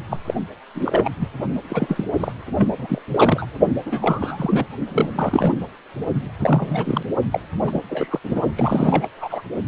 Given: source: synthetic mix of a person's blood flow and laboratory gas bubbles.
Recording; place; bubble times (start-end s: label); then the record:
Doppler ultrasound of blood flow; precordium
0.10-0.16 s: bubbles
0.24-0.34 s: bubbles
0.74-1.09 s: bubbles
1.19-1.29 s: bubbles
1.68-2.04 s: bubbles
2.20-2.32 s: bubbles
2.57-2.68 s: bubbles
2.79-3.01 s: bubbles
3.11-3.46 s: bubbles
3.86-4.66 s: bubbles
4.92-5.57 s: bubbles
6.38-7.03 s: bubbles
7.32-7.40 s: bubbles
7.61-7.81 s: bubbles
7.89-8.20 s: bubbles
8.23-8.41 s: bubbles
8.55-9.08 s: bubbles
9.17-9.42 s: bubbles
From the record:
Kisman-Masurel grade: 342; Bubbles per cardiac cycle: rolling drumbeat, 9 or more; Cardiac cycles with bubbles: 100%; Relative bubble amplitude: moderate (0.250 to 0.450); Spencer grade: 3 (all of the cardiac periods contain showers or single bubble signals, but not dominating or overriding the cardiac motion signals); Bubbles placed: only in the low amplitude regions of the cardiac cycle